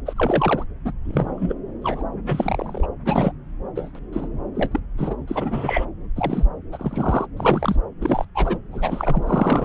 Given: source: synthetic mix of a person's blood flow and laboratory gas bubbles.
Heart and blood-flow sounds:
Doppler ultrasound of blood flow; subclavian vein
0.05-0.14 s: bubbles
0.16-0.64 s: bubbles
0.84-0.92 s: bubbles
1.05-1.54 s: bubbles
1.82-2.03 s: bubbles
2.26-2.88 s: bubbles
3.05-3.32 s: bubbles
3.75-3.89 s: bubbles
3.95-3.99 s: bubbles
4.12-4.29 s: bubbles
4.54-4.79 s: bubbles
4.98-5.16 s: bubbles
5.28-5.86 s: bubbles
6.16-6.44 s: bubbles
6.72-7.27 s: bubbles
7.37-7.76 s: bubbles
8.01-8.25 s: bubbles
8.35-8.57 s: bubbles
8.71-9.23 s: bubbles
9.26-9.65 s: bubbles
From the record:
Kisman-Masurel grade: 242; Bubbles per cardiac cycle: several, 3 to 8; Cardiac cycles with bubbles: 100%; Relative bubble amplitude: moderate (0.250 to 0.450); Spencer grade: 3 (all of the cardiac periods contain showers or single bubble signals, but not dominating or overriding the cardiac motion signals); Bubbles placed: anywhere in the cardiac cycle

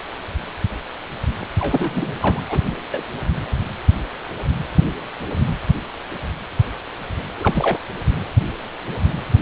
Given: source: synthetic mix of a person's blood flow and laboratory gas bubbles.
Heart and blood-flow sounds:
Doppler ultrasound of blood flow; precordium
1.59-2.13 s: bubbles
2.20-2.42 s: bubbles
2.50-2.60 s: bubbles
2.66-2.85 s: bubbles
2.91-3.03 s: bubbles
7.40-7.79 s: bubbles
From the record:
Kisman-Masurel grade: 222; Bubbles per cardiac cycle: several, 3 to 8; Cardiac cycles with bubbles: 10 to 50%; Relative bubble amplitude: moderate (0.250 to 0.450); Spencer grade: 2 (many but less than half of the cardiac periods contain bubble signals, singularly or in groups); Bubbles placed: anywhere in the cardiac cycle

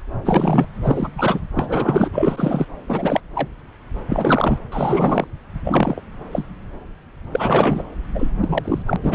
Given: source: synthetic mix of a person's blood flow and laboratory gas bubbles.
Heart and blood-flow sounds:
Doppler ultrasound of blood flow; subclavian vein
0.24-0.67 s: bubbles
0.83-1.08 s: bubbles
1.14-1.40 s: bubbles
1.55-2.66 s: bubbles
2.88-3.21 s: bubbles
3.34-3.48 s: bubbles
4.09-4.59 s: bubbles
4.71-5.27 s: bubbles
5.65-6.02 s: bubbles
6.31-6.46 s: bubbles
7.32-7.83 s: bubbles
8.14-8.32 s: bubbles
8.40-8.82 s: bubbles
8.85-8.96 s: bubbles
9.03-9.15 s: bubbles
From the record:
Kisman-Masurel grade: 333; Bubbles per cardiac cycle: rolling drumbeat, 9 or more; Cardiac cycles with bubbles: 50 to 99%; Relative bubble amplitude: loud (0.450 to 0.775); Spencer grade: 3 (all of the cardiac periods contain showers or single bubble signals, but not dominating or overriding the cardiac motion signals); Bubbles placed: anywhere in the cardiac cycle

